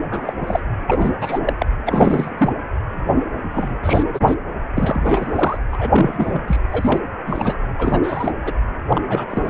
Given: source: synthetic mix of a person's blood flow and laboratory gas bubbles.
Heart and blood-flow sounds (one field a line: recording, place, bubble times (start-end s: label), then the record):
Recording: Doppler ultrasound of blood flow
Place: precordium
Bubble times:
0.11-0.33 s: bubbles
0.41-0.60 s: bubbles
0.87-1.13 s: bubbles
1.21-1.39 s: bubbles
1.45-1.53 s: bubbles
1.59-1.66 s: bubbles
1.85-2.53 s: bubbles
3.54-3.75 s: bubbles
3.83-4.03 s: bubbles
4.13-4.35 s: bubbles
4.75-5.58 s: bubbles
5.71-6.42 s: bubbles
6.47-6.58 s: bubbles
6.72-6.99 s: bubbles
7.26-7.56 s: bubbles
7.78-8.00 s: bubbles
8.03-8.32 s: bubbles
8.44-8.54 s: bubbles
8.90-9.02 s: bubbles
9.05-9.27 s: bubbles
9.29-9.50 s: bubbles
From the record:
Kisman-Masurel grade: 342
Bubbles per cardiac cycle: rolling drumbeat, 9 or more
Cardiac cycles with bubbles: 100%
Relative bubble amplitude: moderate (0.250 to 0.450)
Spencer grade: 3 (all of the cardiac periods contain showers or single bubble signals, but not dominating or overriding the cardiac motion signals)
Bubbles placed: anywhere in the cardiac cycle